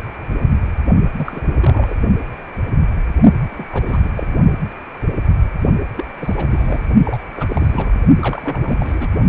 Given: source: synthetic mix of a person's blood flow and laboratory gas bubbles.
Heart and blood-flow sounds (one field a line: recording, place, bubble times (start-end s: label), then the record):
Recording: Doppler ultrasound of blood flow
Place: precordium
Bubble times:
1.16-1.41 s: bubbles
1.46-1.98 s: bubbles
3.50-3.65 s: bubbles
3.72-4.00 s: bubbles
4.03-4.10 s: bubbles
4.15-4.35 s: bubbles
5.97-6.05 s: bubbles
6.19-6.46 s: bubbles
6.50-6.81 s: bubbles
7.05-7.20 s: bubbles
7.36-8.03 s: bubbles
8.20-9.09 s: bubbles
From the record:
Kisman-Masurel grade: 332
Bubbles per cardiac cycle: rolling drumbeat, 9 or more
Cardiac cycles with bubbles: 50 to 99%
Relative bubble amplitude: moderate (0.250 to 0.450)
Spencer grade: 3 (all of the cardiac periods contain showers or single bubble signals, but not dominating or overriding the cardiac motion signals)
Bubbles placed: only in the low amplitude regions of the cardiac cycle